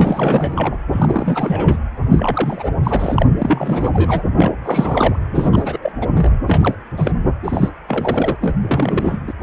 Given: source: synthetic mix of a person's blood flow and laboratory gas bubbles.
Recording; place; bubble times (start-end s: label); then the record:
Doppler ultrasound of blood flow; precordium
0.00-0.77 s: bubbles
0.92-1.77 s: bubbles
2.10-2.71 s: bubbles
2.83-3.26 s: bubbles
3.38-3.90 s: bubbles
3.93-4.23 s: bubbles
4.38-4.54 s: bubbles
4.64-5.19 s: bubbles
5.34-5.78 s: bubbles
5.82-5.92 s: bubbles
6.01-6.07 s: bubbles
6.15-6.37 s: bubbles
6.46-6.74 s: bubbles
6.97-7.12 s: bubbles
7.43-7.71 s: bubbles
7.88-8.37 s: bubbles
8.40-8.56 s: bubbles
8.61-9.20 s: bubbles
9.27-9.33 s: bubbles
From the record:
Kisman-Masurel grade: 342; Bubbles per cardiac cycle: rolling drumbeat, 9 or more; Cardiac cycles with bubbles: 100%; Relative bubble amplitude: moderate (0.250 to 0.450); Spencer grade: 3 (all of the cardiac periods contain showers or single bubble signals, but not dominating or overriding the cardiac motion signals); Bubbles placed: anywhere in the cardiac cycle